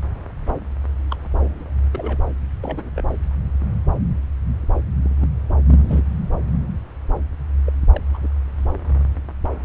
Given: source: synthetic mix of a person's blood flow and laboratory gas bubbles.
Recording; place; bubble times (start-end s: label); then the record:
Doppler ultrasound of blood flow; subclavian vein
1.10-1.16 s: bubbles
1.35-1.71 s: bubbles
1.92-2.17 s: bubbles
2.62-2.90 s: bubbles
2.96-3.03 s: bubbles
5.03-5.29 s: bubbles
5.66-6.04 s: bubbles
7.66-7.73 s: bubbles
7.93-8.01 s: bubbles
8.14-8.18 s: bubbles
8.23-8.28 s: bubbles
From the record:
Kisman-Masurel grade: 221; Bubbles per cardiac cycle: several, 3 to 8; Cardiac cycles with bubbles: 10 to 50%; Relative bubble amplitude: barely perceptible (0.100 to 0.250); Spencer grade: 2 (many but less than half of the cardiac periods contain bubble signals, singularly or in groups); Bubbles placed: anywhere in the cardiac cycle